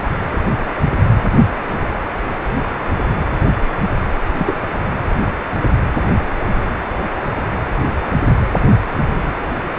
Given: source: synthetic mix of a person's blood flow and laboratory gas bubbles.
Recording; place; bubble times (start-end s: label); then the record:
Doppler ultrasound of blood flow; precordium
4.39-4.54 s: bubbles
From the record:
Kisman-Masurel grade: 123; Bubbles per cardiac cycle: 1 to 2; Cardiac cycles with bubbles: 10 to 50%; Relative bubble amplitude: loud (0.450 to 0.775); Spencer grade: 2 (many but less than half of the cardiac periods contain bubble signals, singularly or in groups); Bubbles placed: anywhere in the cardiac cycle